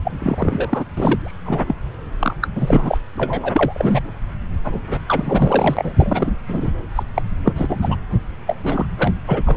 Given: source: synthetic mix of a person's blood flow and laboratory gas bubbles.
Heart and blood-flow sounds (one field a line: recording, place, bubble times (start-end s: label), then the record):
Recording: Doppler ultrasound of blood flow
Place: subclavian vein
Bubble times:
0.04-0.11 s: bubbles
0.20-0.85 s: bubbles
0.97-1.38 s: bubbles
1.45-1.63 s: bubbles
1.66-1.75 s: bubbles
2.21-2.34 s: bubbles
2.42-2.48 s: bubbles
2.54-2.98 s: bubbles
3.16-4.05 s: bubbles
4.64-4.79 s: bubbles
4.83-5.00 s: bubbles
5.08-6.31 s: bubbles
6.48-6.71 s: bubbles
6.95-7.03 s: bubbles
7.15-7.22 s: bubbles
7.44-7.77 s: bubbles
7.82-7.97 s: bubbles
8.46-8.55 s: bubbles
8.63-8.86 s: bubbles
8.98-9.12 s: bubbles
9.27-9.42 s: bubbles
9.45-9.57 s: bubbles
From the record:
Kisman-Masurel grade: 332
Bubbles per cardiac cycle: rolling drumbeat, 9 or more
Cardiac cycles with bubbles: 50 to 99%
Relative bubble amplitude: moderate (0.250 to 0.450)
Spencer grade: 3 (all of the cardiac periods contain showers or single bubble signals, but not dominating or overriding the cardiac motion signals)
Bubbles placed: anywhere in the cardiac cycle